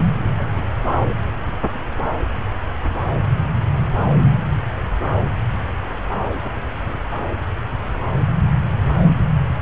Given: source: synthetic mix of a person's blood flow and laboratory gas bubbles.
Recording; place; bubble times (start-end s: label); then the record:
Doppler ultrasound of blood flow; subclavian vein
0.39-0.51 s: bubbles
0.55-0.66 s: bubbles
From the record:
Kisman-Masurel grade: 111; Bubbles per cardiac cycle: 1 to 2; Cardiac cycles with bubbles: 1 to 10%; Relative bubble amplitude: barely perceptible (0.100 to 0.250); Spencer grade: 1 (occasional bubble signal discernible with the cardiac motion signal, with majority of cardiac periods free of bubbles); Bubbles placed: anywhere in the cardiac cycle